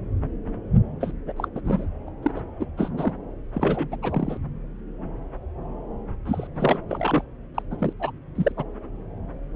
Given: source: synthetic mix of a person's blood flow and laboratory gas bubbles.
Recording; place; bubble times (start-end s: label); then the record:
Doppler ultrasound of blood flow; subclavian vein
1.00-1.13 s: bubbles
1.26-1.32 s: bubbles
1.36-1.48 s: bubbles
1.55-1.61 s: bubbles
1.64-1.86 s: bubbles
2.07-2.09 s: bubbles
2.23-2.31 s: bubbles
2.35-2.42 s: bubbles
2.60-2.65 s: bubbles
2.77-2.90 s: bubbles
2.97-3.13 s: bubbles
3.54-3.96 s: bubbles
4.02-4.38 s: bubbles
6.25-6.47 s: bubbles
6.55-6.79 s: bubbles
6.88-7.24 s: bubbles
7.54-7.62 s: bubbles
7.71-7.77 s: bubbles
7.80-7.93 s: bubbles
8.00-8.11 s: bubbles
8.35-8.52 s: bubbles
8.56-8.63 s: bubbles
From the record:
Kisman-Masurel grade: 222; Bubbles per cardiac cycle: several, 3 to 8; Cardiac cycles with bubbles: 10 to 50%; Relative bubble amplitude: moderate (0.250 to 0.450); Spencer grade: 2 (many but less than half of the cardiac periods contain bubble signals, singularly or in groups); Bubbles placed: anywhere in the cardiac cycle